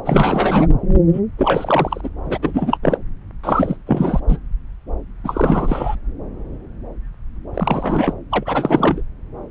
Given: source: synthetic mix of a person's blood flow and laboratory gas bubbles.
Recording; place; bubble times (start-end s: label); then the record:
Doppler ultrasound of blood flow; subclavian vein
0.04-0.68 s: bubbles
1.12-1.20 s: bubbles
1.37-2.09 s: bubbles
2.25-2.38 s: bubbles
2.42-2.78 s: bubbles
2.82-2.98 s: bubbles
3.44-3.77 s: bubbles
3.86-4.20 s: bubbles
4.28-4.37 s: bubbles
5.24-5.96 s: bubbles
7.54-8.13 s: bubbles
8.30-9.03 s: bubbles
From the record:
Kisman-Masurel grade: 333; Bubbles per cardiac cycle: rolling drumbeat, 9 or more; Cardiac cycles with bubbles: 50 to 99%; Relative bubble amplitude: loud (0.450 to 0.775); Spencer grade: 3 (all of the cardiac periods contain showers or single bubble signals, but not dominating or overriding the cardiac motion signals); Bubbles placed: anywhere in the cardiac cycle